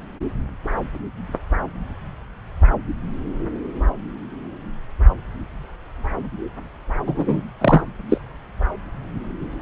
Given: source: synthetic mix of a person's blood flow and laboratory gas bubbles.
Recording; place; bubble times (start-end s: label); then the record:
Doppler ultrasound of blood flow; subclavian vein
7.07-7.43 s: bubbles
7.61-7.82 s: bubbles
8.09-8.17 s: bubbles
From the record:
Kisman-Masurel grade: 213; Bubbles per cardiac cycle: several, 3 to 8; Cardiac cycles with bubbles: 1 to 10%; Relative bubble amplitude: loud (0.450 to 0.775); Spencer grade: 1 (occasional bubble signal discernible with the cardiac motion signal, with majority of cardiac periods free of bubbles); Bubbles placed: anywhere in the cardiac cycle